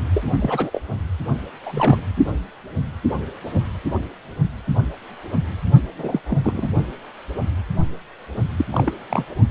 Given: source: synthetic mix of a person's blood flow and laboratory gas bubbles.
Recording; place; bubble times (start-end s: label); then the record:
Doppler ultrasound of blood flow; precordium
0.14-0.32 s: bubbles
0.39-0.70 s: bubbles
0.73-0.80 s: bubbles
1.66-2.00 s: bubbles
5.98-6.20 s: bubbles
6.28-6.38 s: bubbles
6.43-6.69 s: bubbles
8.56-8.65 s: bubbles
8.71-8.92 s: bubbles
9.09-9.27 s: bubbles
From the record:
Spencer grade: 2 (many but less than half of the cardiac periods contain bubble signals, singularly or in groups); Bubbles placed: only in the low amplitude regions of the cardiac cycle